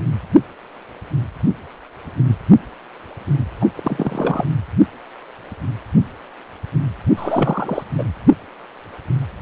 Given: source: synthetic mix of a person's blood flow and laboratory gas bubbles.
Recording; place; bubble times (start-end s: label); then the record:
Doppler ultrasound of blood flow; precordium
3.60-3.69 s: bubbles
3.76-4.45 s: bubbles
7.16-7.84 s: bubbles
7.98-8.04 s: bubbles
From the record:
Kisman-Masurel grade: 222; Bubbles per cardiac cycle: several, 3 to 8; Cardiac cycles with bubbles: 10 to 50%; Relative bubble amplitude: moderate (0.250 to 0.450); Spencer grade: 2 (many but less than half of the cardiac periods contain bubble signals, singularly or in groups); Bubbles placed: anywhere in the cardiac cycle